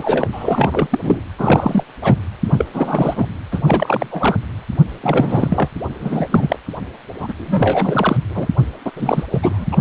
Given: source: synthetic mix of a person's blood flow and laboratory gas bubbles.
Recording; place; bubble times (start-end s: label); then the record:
Doppler ultrasound of blood flow; precordium
0.00-0.25 s: bubbles
0.32-0.88 s: bubbles
0.90-1.21 s: bubbles
1.39-1.83 s: bubbles
2.02-2.15 s: bubbles
2.44-2.69 s: bubbles
2.73-3.27 s: bubbles
3.51-4.38 s: bubbles
5.02-5.68 s: bubbles
5.72-5.75 s: bubbles
6.00-6.26 s: bubbles
6.30-6.58 s: bubbles
7.20-7.33 s: bubbles
7.37-8.17 s: bubbles
8.30-8.49 s: bubbles
8.86-8.91 s: bubbles
8.96-9.24 s: bubbles
9.32-9.66 s: bubbles
9.72-9.78 s: bubbles
From the record:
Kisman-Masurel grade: 343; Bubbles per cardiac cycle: rolling drumbeat, 9 or more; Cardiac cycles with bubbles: 100%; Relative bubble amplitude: loud (0.450 to 0.775); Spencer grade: 3 (all of the cardiac periods contain showers or single bubble signals, but not dominating or overriding the cardiac motion signals); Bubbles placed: anywhere in the cardiac cycle